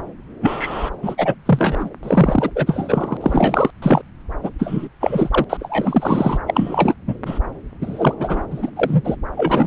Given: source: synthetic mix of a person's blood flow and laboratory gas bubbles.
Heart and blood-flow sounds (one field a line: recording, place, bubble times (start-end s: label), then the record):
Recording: Doppler ultrasound of blood flow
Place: subclavian vein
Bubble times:
0.41-0.90 s: bubbles
1.02-1.15 s: bubbles
1.18-1.34 s: bubbles
1.45-1.90 s: bubbles
2.03-2.50 s: bubbles
2.55-3.17 s: bubbles
3.21-3.70 s: bubbles
3.82-4.02 s: bubbles
4.43-4.51 s: bubbles
4.58-4.88 s: bubbles
5.01-5.45 s: bubbles
5.49-6.38 s: bubbles
6.47-6.94 s: bubbles
7.07-7.18 s: bubbles
7.26-7.39 s: bubbles
7.81-8.14 s: bubbles
8.20-8.46 s: bubbles
8.50-8.70 s: bubbles
8.76-9.01 s: bubbles
9.04-9.16 s: bubbles
9.37-9.67 s: bubbles
From the record:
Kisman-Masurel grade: 333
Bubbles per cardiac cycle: rolling drumbeat, 9 or more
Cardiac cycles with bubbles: 50 to 99%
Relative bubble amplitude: loud (0.450 to 0.775)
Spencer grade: 3 (all of the cardiac periods contain showers or single bubble signals, but not dominating or overriding the cardiac motion signals)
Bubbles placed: anywhere in the cardiac cycle